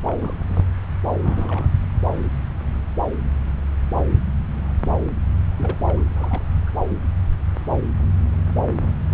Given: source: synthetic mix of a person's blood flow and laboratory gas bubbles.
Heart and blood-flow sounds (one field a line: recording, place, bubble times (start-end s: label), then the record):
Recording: Doppler ultrasound of blood flow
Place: subclavian vein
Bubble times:
0.06-0.42 s: bubbles
0.46-0.64 s: bubbles
1.20-1.68 s: bubbles
5.56-5.78 s: bubbles
5.87-6.02 s: bubbles
6.13-6.43 s: bubbles
6.67-6.70 s: bubbles
From the record:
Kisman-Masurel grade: 221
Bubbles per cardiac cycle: several, 3 to 8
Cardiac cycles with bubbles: 10 to 50%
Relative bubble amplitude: barely perceptible (0.100 to 0.250)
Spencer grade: 2 (many but less than half of the cardiac periods contain bubble signals, singularly or in groups)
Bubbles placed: anywhere in the cardiac cycle